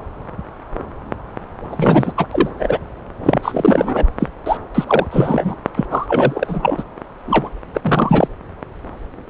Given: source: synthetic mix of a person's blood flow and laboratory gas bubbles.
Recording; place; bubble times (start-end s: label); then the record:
Doppler ultrasound of blood flow; subclavian vein
1.70-2.12 s: bubbles
2.17-2.27 s: bubbles
2.31-2.79 s: bubbles
3.25-4.10 s: bubbles
4.20-4.28 s: bubbles
4.46-4.58 s: bubbles
4.74-4.84 s: bubbles
4.87-5.07 s: bubbles
5.11-5.56 s: bubbles
5.76-5.86 s: bubbles
5.90-6.83 s: bubbles
7.26-7.50 s: bubbles
7.75-8.28 s: bubbles
From the record:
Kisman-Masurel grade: 333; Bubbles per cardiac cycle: rolling drumbeat, 9 or more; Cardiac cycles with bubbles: 50 to 99%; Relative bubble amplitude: loud (0.450 to 0.775); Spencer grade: 3 (all of the cardiac periods contain showers or single bubble signals, but not dominating or overriding the cardiac motion signals); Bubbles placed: anywhere in the cardiac cycle